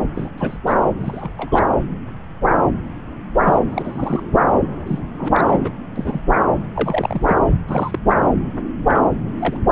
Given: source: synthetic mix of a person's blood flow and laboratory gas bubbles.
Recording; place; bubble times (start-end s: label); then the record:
Doppler ultrasound of blood flow; subclavian vein
0.14-0.30 s: bubbles
0.38-0.57 s: bubbles
0.66-0.74 s: bubbles
0.97-1.30 s: bubbles
1.36-1.65 s: bubbles
3.45-3.59 s: bubbles
3.71-4.23 s: bubbles
4.87-4.99 s: bubbles
5.17-5.71 s: bubbles
5.96-6.21 s: bubbles
6.74-7.34 s: bubbles
7.67-7.99 s: bubbles
8.09-8.16 s: bubbles
8.87-9.14 s: bubbles
9.39-9.56 s: bubbles
From the record:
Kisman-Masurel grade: 232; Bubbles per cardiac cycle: several, 3 to 8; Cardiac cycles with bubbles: 50 to 99%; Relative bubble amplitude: moderate (0.250 to 0.450); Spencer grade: 3 (all of the cardiac periods contain showers or single bubble signals, but not dominating or overriding the cardiac motion signals); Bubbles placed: anywhere in the cardiac cycle